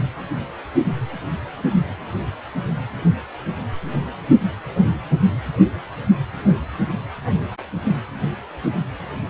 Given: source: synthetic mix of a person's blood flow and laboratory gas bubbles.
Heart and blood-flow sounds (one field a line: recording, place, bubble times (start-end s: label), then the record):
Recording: Doppler ultrasound of blood flow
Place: precordium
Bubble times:
no bubbles
From the record:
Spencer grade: 0 (complete lack of bubble signals)